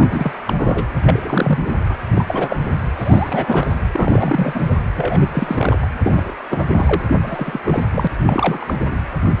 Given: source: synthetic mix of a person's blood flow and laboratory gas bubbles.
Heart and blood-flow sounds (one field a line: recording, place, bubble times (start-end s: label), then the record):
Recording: Doppler ultrasound of blood flow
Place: precordium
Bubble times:
0.00-0.32 s: bubbles
0.46-0.86 s: bubbles
1.08-1.70 s: bubbles
1.89-1.96 s: bubbles
2.15-2.25 s: bubbles
2.27-2.71 s: bubbles
2.97-3.79 s: bubbles
3.92-4.78 s: bubbles
4.94-5.86 s: bubbles
6.03-6.31 s: bubbles
6.50-7.02 s: bubbles
7.08-7.17 s: bubbles
7.21-7.58 s: bubbles
7.64-7.83 s: bubbles
7.91-8.07 s: bubbles
8.25-8.74 s: bubbles
8.80-8.99 s: bubbles
From the record:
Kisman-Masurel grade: 332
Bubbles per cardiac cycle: rolling drumbeat, 9 or more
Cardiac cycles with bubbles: 50 to 99%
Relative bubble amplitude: moderate (0.250 to 0.450)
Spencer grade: 3 (all of the cardiac periods contain showers or single bubble signals, but not dominating or overriding the cardiac motion signals)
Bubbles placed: anywhere in the cardiac cycle